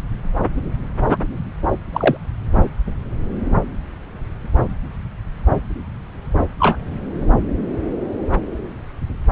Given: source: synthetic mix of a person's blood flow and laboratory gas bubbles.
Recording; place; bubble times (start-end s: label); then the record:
Doppler ultrasound of blood flow; subclavian vein
1.08-1.18 s: bubbles
1.92-2.17 s: bubbles
6.60-6.77 s: bubbles
From the record:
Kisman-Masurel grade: 123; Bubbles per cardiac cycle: 1 to 2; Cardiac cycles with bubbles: 10 to 50%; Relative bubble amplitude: loud (0.450 to 0.775); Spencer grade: 2 (many but less than half of the cardiac periods contain bubble signals, singularly or in groups); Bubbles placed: anywhere in the cardiac cycle